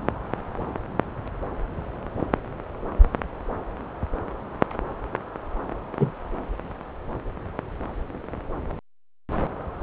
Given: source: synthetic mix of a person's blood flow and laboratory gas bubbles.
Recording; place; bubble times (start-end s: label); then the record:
Doppler ultrasound of blood flow; subclavian vein
5.98-6.12 s: bubbles
From the record:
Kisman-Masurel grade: 113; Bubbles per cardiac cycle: 1 to 2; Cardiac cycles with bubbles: 1 to 10%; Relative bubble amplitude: loud (0.450 to 0.775); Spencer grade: 1 (occasional bubble signal discernible with the cardiac motion signal, with majority of cardiac periods free of bubbles); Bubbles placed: anywhere in the cardiac cycle